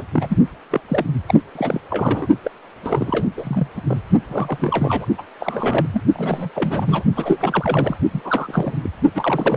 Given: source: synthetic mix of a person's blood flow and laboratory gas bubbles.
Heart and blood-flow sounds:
Doppler ultrasound of blood flow; precordium
0.00-0.03 s: bubbles
0.14-0.37 s: bubbles
0.71-0.80 s: bubbles
0.88-1.06 s: bubbles
1.27-1.42 s: bubbles
1.55-1.80 s: bubbles
1.91-2.28 s: bubbles
2.44-2.51 s: bubbles
2.82-3.28 s: bubbles
3.37-3.67 s: bubbles
3.76-3.81 s: bubbles
3.87-3.98 s: bubbles
4.29-5.06 s: bubbles
5.17-5.23 s: bubbles
5.40-5.87 s: bubbles
5.94-6.03 s: bubbles
6.13-6.50 s: bubbles
6.54-7.04 s: bubbles
7.13-7.96 s: bubbles
8.13-8.78 s: bubbles
8.84-8.89 s: bubbles
9.14-9.57 s: bubbles
From the record:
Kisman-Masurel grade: 342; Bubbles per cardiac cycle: rolling drumbeat, 9 or more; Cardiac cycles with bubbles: 100%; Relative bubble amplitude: moderate (0.250 to 0.450); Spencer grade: 3 (all of the cardiac periods contain showers or single bubble signals, but not dominating or overriding the cardiac motion signals); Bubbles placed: only in the low amplitude regions of the cardiac cycle

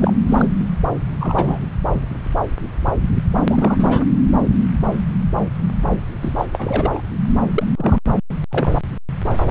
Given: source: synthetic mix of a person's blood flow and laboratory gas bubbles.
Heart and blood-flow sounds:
Doppler ultrasound of blood flow; subclavian vein
0.00-0.13 s: bubbles
0.29-0.47 s: bubbles
1.20-1.60 s: bubbles
3.34-3.43 s: bubbles
3.49-4.04 s: bubbles
6.21-6.35 s: bubbles
6.38-6.46 s: bubbles
6.53-7.02 s: bubbles
7.54-7.63 s: bubbles
7.77-8.00 s: bubbles
8.51-8.72 s: bubbles
From the record:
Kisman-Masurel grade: 232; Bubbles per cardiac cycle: several, 3 to 8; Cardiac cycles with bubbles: 50 to 99%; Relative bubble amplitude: moderate (0.250 to 0.450); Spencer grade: 3 (all of the cardiac periods contain showers or single bubble signals, but not dominating or overriding the cardiac motion signals); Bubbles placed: anywhere in the cardiac cycle

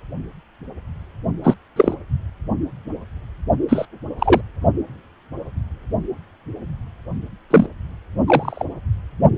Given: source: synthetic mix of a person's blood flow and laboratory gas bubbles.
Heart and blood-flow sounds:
Doppler ultrasound of blood flow; precordium
1.44-1.54 s: bubbles
1.76-1.95 s: bubbles
3.69-3.86 s: bubbles
4.19-4.41 s: bubbles
7.50-7.66 s: bubbles
8.27-8.64 s: bubbles
From the record:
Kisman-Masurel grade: 123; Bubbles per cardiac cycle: 1 to 2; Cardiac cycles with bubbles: 10 to 50%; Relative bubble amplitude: loud (0.450 to 0.775); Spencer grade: 2 (many but less than half of the cardiac periods contain bubble signals, singularly or in groups); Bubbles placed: only in the low amplitude regions of the cardiac cycle

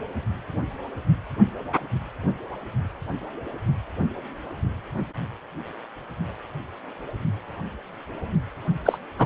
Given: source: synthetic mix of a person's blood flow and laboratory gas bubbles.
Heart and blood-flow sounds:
Doppler ultrasound of blood flow; precordium
8.85-8.98 s: bubbles
9.18-9.26 s: bubbles
From the record:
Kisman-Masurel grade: 113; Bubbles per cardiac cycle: 1 to 2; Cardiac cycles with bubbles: 1 to 10%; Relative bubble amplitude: loud (0.450 to 0.775); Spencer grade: 1 (occasional bubble signal discernible with the cardiac motion signal, with majority of cardiac periods free of bubbles); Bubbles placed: only in the low amplitude regions of the cardiac cycle

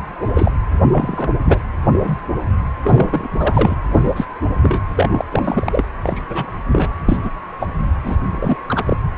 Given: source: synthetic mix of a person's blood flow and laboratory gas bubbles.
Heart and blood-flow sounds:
Doppler ultrasound of blood flow; precordium
0.35-0.51 s: bubbles
0.91-1.34 s: bubbles
1.45-1.60 s: bubbles
1.93-2.20 s: bubbles
2.84-3.28 s: bubbles
3.30-3.75 s: bubbles
3.91-4.25 s: bubbles
4.62-4.80 s: bubbles
4.95-5.25 s: bubbles
5.31-5.84 s: bubbles
6.05-6.21 s: bubbles
6.29-6.51 s: bubbles
6.72-6.89 s: bubbles
7.05-7.17 s: bubbles
7.23-7.30 s: bubbles
7.59-7.69 s: bubbles
8.03-8.17 s: bubbles
8.29-8.57 s: bubbles
8.68-8.83 s: bubbles
8.86-8.97 s: bubbles
From the record:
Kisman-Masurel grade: 242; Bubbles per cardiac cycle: several, 3 to 8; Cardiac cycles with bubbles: 100%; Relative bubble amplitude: moderate (0.250 to 0.450); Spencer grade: 3 (all of the cardiac periods contain showers or single bubble signals, but not dominating or overriding the cardiac motion signals); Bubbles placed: anywhere in the cardiac cycle

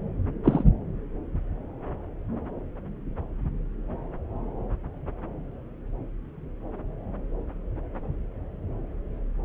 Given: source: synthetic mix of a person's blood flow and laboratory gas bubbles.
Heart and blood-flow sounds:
Doppler ultrasound of blood flow; subclavian vein
0.44-0.63 s: bubbles
From the record:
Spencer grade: 1 (occasional bubble signal discernible with the cardiac motion signal, with majority of cardiac periods free of bubbles); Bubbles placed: anywhere in the cardiac cycle

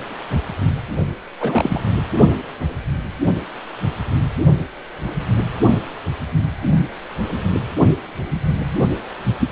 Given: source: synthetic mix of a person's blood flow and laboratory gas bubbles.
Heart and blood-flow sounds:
Doppler ultrasound of blood flow; precordium
1.40-1.81 s: bubbles
1.86-1.93 s: bubbles
From the record:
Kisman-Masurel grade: 212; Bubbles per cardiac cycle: several, 3 to 8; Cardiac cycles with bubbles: 1 to 10%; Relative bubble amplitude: moderate (0.250 to 0.450); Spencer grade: 1 (occasional bubble signal discernible with the cardiac motion signal, with majority of cardiac periods free of bubbles); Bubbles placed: only in the low amplitude regions of the cardiac cycle

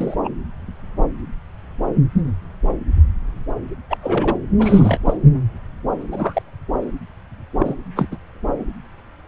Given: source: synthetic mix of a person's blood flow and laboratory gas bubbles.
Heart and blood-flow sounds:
Doppler ultrasound of blood flow; subclavian vein
0.00-0.15 s: bubbles
0.24-0.29 s: bubbles
3.90-3.98 s: bubbles
4.02-4.36 s: bubbles
4.58-4.99 s: bubbles
5.05-5.17 s: bubbles
6.11-6.42 s: bubbles
7.59-7.74 s: bubbles
7.96-8.07 s: bubbles
8.11-8.17 s: bubbles
From the record:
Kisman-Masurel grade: 222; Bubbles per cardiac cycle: several, 3 to 8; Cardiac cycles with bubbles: 10 to 50%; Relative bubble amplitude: moderate (0.250 to 0.450); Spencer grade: 2 (many but less than half of the cardiac periods contain bubble signals, singularly or in groups); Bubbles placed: anywhere in the cardiac cycle

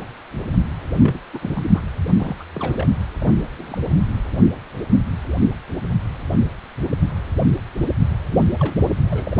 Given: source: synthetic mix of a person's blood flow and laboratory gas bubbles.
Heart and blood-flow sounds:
Doppler ultrasound of blood flow; precordium
0.98-1.20 s: bubbles
1.33-1.51 s: bubbles
1.53-1.71 s: bubbles
1.74-1.81 s: bubbles
2.15-2.36 s: bubbles
2.40-2.44 s: bubbles
2.54-2.87 s: bubbles
3.20-3.82 s: bubbles
8.31-8.38 s: bubbles
8.59-8.82 s: bubbles
9.10-9.39 s: bubbles
From the record:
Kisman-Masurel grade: 221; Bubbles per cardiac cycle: several, 3 to 8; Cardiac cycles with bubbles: 10 to 50%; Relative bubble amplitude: barely perceptible (0.100 to 0.250); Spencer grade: 2 (many but less than half of the cardiac periods contain bubble signals, singularly or in groups); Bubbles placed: anywhere in the cardiac cycle

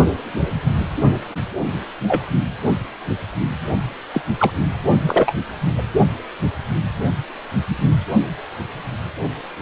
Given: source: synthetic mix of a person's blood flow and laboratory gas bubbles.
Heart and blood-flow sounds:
Doppler ultrasound of blood flow; precordium
0.34-0.41 s: bubbles
2.07-2.26 s: bubbles
4.13-4.21 s: bubbles
4.38-4.52 s: bubbles
5.07-5.33 s: bubbles
5.78-5.82 s: bubbles
From the record:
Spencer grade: 2 (many but less than half of the cardiac periods contain bubble signals, singularly or in groups); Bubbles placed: only in the low amplitude regions of the cardiac cycle

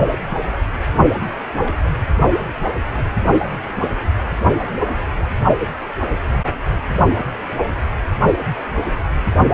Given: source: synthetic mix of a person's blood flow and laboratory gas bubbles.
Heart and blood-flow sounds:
Doppler ultrasound of blood flow; precordium
1.61-1.77 s: bubbles
From the record:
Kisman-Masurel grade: 111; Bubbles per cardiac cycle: 1 to 2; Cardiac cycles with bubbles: 1 to 10%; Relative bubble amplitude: barely perceptible (0.100 to 0.250); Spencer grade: 1 (occasional bubble signal discernible with the cardiac motion signal, with majority of cardiac periods free of bubbles); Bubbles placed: only in the low amplitude regions of the cardiac cycle

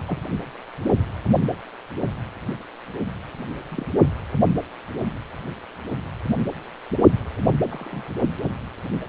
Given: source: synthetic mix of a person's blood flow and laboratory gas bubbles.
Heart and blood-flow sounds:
Doppler ultrasound of blood flow; precordium
0.07-0.18 s: bubbles
3.70-3.85 s: bubbles
7.70-8.10 s: bubbles
From the record:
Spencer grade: 2 (many but less than half of the cardiac periods contain bubble signals, singularly or in groups); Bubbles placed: only in the low amplitude regions of the cardiac cycle

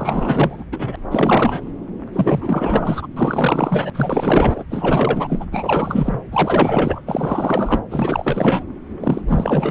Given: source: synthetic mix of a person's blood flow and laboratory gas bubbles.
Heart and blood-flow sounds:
Doppler ultrasound of blood flow; subclavian vein
0.00-0.64 s: bubbles
0.71-0.96 s: bubbles
1.10-1.60 s: bubbles
2.12-3.08 s: bubbles
3.16-3.90 s: bubbles
3.94-4.64 s: bubbles
4.71-5.45 s: bubbles
5.52-6.19 s: bubbles
6.31-7.00 s: bubbles
7.06-7.79 s: bubbles
7.88-8.63 s: bubbles
9.00-9.21 s: bubbles
9.27-9.71 s: bubbles
From the record:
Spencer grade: 4 (maximum detectable bubble signal sounding continuously throughout systole and diastole of every cardiac period, and overriding the amplitude of the normal cardiac signals); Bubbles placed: anywhere in the cardiac cycle

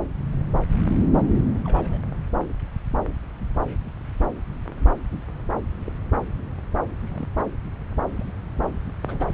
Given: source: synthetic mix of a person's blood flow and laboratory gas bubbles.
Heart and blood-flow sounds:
Doppler ultrasound of blood flow; subclavian vein
1.35-1.41 s: bubbles
1.65-2.00 s: bubbles
4.68-4.96 s: bubbles
5.86-5.98 s: bubbles
7.07-7.28 s: bubbles
8.16-8.25 s: bubbles
9.05-9.28 s: bubbles
From the record:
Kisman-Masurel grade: 121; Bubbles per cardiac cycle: 1 to 2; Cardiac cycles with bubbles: 10 to 50%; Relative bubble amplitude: barely perceptible (0.100 to 0.250); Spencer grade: 2 (many but less than half of the cardiac periods contain bubble signals, singularly or in groups); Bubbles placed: anywhere in the cardiac cycle

